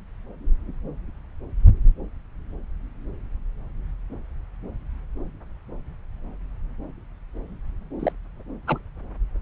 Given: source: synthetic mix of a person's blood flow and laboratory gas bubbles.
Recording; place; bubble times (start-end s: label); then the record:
Doppler ultrasound of blood flow; subclavian vein
7.99-8.12 s: bubbles
8.67-8.79 s: bubbles
From the record:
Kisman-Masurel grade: 122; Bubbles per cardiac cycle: 1 to 2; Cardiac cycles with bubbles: 10 to 50%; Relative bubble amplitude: moderate (0.250 to 0.450); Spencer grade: 2 (many but less than half of the cardiac periods contain bubble signals, singularly or in groups); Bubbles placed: anywhere in the cardiac cycle